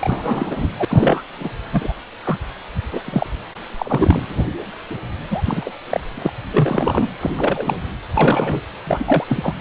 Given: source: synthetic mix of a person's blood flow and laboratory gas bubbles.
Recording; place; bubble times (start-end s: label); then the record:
Doppler ultrasound of blood flow; precordium
0.00-0.68 s: bubbles
0.75-0.85 s: bubbles
0.89-1.21 s: bubbles
1.39-1.50 s: bubbles
1.71-1.94 s: bubbles
2.23-2.39 s: bubbles
2.92-3.00 s: bubbles
3.04-3.27 s: bubbles
3.78-4.23 s: bubbles
4.29-4.47 s: bubbles
5.31-5.42 s: bubbles
5.46-5.73 s: bubbles
5.90-6.00 s: bubbles
6.15-6.32 s: bubbles
6.52-7.10 s: bubbles
7.21-7.30 s: bubbles
7.36-7.75 s: bubbles
8.13-8.62 s: bubbles
8.87-9.24 s: bubbles
9.29-9.55 s: bubbles
From the record:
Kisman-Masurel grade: 242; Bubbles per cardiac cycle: several, 3 to 8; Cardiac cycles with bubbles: 100%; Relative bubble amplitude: moderate (0.250 to 0.450); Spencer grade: 3 (all of the cardiac periods contain showers or single bubble signals, but not dominating or overriding the cardiac motion signals); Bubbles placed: anywhere in the cardiac cycle